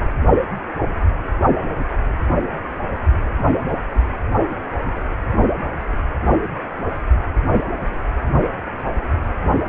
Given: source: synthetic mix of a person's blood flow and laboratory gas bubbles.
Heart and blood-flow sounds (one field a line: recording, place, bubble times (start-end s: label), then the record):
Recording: Doppler ultrasound of blood flow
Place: precordium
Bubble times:
no bubbles
From the record:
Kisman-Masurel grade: 000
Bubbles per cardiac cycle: 0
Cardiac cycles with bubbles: 0%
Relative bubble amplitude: no bubbles discernible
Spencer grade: 0 (complete lack of bubble signals)